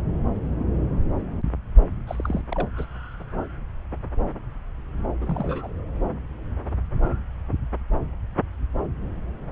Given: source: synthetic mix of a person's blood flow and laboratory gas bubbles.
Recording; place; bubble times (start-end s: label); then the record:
Doppler ultrasound of blood flow; subclavian vein
2.07-2.41 s: bubbles
2.51-2.67 s: bubbles
2.77-2.85 s: bubbles
5.21-5.67 s: bubbles
From the record:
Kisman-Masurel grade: 221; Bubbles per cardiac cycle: several, 3 to 8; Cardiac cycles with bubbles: 10 to 50%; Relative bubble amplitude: barely perceptible (0.100 to 0.250); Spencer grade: 2 (many but less than half of the cardiac periods contain bubble signals, singularly or in groups); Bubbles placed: anywhere in the cardiac cycle